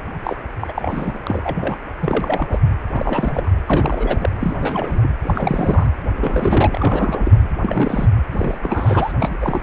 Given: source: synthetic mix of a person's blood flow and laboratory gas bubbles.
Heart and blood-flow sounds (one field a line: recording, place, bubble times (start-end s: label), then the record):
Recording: Doppler ultrasound of blood flow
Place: precordium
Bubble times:
0.23-0.36 s: bubbles
0.59-0.72 s: bubbles
0.76-1.18 s: bubbles
1.27-1.76 s: bubbles
1.99-2.58 s: bubbles
2.93-3.50 s: bubbles
3.67-4.29 s: bubbles
4.40-4.57 s: bubbles
4.60-5.11 s: bubbles
5.23-5.86 s: bubbles
6.14-7.47 s: bubbles
7.61-8.08 s: bubbles
8.31-8.58 s: bubbles
8.62-9.12 s: bubbles
9.20-9.37 s: bubbles
9.40-9.62 s: bubbles
From the record:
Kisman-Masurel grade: 332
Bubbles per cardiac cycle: rolling drumbeat, 9 or more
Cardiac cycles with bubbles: 50 to 99%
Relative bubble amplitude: moderate (0.250 to 0.450)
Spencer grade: 3 (all of the cardiac periods contain showers or single bubble signals, but not dominating or overriding the cardiac motion signals)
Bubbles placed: anywhere in the cardiac cycle